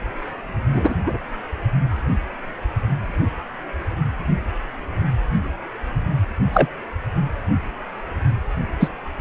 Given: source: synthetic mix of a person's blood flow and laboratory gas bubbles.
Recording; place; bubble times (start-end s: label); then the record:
Doppler ultrasound of blood flow; precordium
0.73-0.94 s: bubbles
1.06-1.17 s: bubbles
6.53-6.69 s: bubbles
8.79-8.89 s: bubbles
From the record:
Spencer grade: 2 (many but less than half of the cardiac periods contain bubble signals, singularly or in groups); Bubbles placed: anywhere in the cardiac cycle